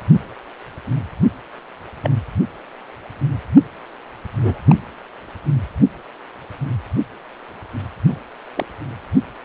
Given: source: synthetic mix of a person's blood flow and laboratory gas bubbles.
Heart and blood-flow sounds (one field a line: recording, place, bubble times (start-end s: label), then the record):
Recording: Doppler ultrasound of blood flow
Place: precordium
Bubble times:
2.03-2.10 s: bubbles
4.33-4.59 s: bubbles
4.67-4.75 s: bubbles
8.08-8.19 s: bubbles
8.57-8.66 s: bubbles
From the record:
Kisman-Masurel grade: 122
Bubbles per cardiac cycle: 1 to 2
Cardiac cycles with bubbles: 10 to 50%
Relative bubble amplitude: moderate (0.250 to 0.450)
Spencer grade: 2 (many but less than half of the cardiac periods contain bubble signals, singularly or in groups)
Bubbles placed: only in the low amplitude regions of the cardiac cycle